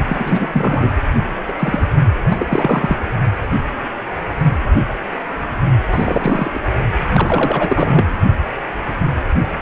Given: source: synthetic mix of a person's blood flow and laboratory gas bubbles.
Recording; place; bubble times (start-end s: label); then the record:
Doppler ultrasound of blood flow; precordium
0.07-0.99 s: bubbles
1.48-1.53 s: bubbles
1.59-1.88 s: bubbles
2.28-2.97 s: bubbles
5.90-6.61 s: bubbles
7.14-8.05 s: bubbles
From the record:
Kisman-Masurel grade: 333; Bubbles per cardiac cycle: rolling drumbeat, 9 or more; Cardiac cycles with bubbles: 50 to 99%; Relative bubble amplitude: loud (0.450 to 0.775); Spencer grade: 3 (all of the cardiac periods contain showers or single bubble signals, but not dominating or overriding the cardiac motion signals); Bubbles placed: only in the low amplitude regions of the cardiac cycle